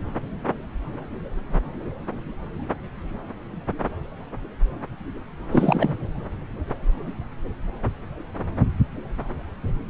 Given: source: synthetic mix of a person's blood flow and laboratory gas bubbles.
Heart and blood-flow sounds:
Doppler ultrasound of blood flow; subclavian vein
5.50-5.97 s: bubbles
From the record:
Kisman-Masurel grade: 213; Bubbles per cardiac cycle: several, 3 to 8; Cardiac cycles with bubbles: 1 to 10%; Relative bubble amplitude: loud (0.450 to 0.775); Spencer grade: 1 (occasional bubble signal discernible with the cardiac motion signal, with majority of cardiac periods free of bubbles); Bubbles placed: anywhere in the cardiac cycle

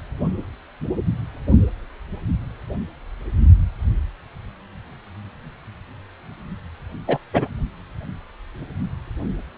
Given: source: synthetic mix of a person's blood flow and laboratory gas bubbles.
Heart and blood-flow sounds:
Doppler ultrasound of blood flow; precordium
7.07-7.18 s: bubbles
7.33-7.47 s: bubbles
From the record:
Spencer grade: 1 (occasional bubble signal discernible with the cardiac motion signal, with majority of cardiac periods free of bubbles); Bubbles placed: only in the low amplitude regions of the cardiac cycle

